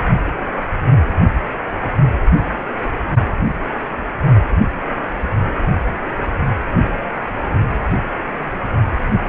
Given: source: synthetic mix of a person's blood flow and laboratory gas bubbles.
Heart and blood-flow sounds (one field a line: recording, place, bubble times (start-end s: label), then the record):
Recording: Doppler ultrasound of blood flow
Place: precordium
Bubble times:
6.22-6.31 s: bubbles
From the record:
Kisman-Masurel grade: 121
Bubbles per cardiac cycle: 1 to 2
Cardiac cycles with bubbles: 10 to 50%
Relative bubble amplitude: barely perceptible (0.100 to 0.250)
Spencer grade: 2 (many but less than half of the cardiac periods contain bubble signals, singularly or in groups)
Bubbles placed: only in the low amplitude regions of the cardiac cycle